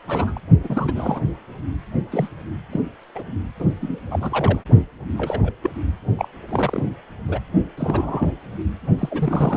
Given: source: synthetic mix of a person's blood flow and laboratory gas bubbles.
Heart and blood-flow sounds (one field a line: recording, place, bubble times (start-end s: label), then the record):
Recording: Doppler ultrasound of blood flow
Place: precordium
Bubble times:
0.07-0.40 s: bubbles
0.64-0.93 s: bubbles
0.95-1.21 s: bubbles
2.11-2.29 s: bubbles
2.71-2.80 s: bubbles
3.15-3.23 s: bubbles
3.60-3.65 s: bubbles
3.80-4.00 s: bubbles
4.11-4.59 s: bubbles
5.17-5.51 s: bubbles
5.62-5.71 s: bubbles
6.18-6.29 s: bubbles
6.49-6.83 s: bubbles
7.28-7.39 s: bubbles
7.77-8.32 s: bubbles
8.98-9.57 s: bubbles
From the record:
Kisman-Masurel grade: 242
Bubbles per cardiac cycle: several, 3 to 8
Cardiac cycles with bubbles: 100%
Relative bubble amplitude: moderate (0.250 to 0.450)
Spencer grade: 3 (all of the cardiac periods contain showers or single bubble signals, but not dominating or overriding the cardiac motion signals)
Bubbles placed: only in the low amplitude regions of the cardiac cycle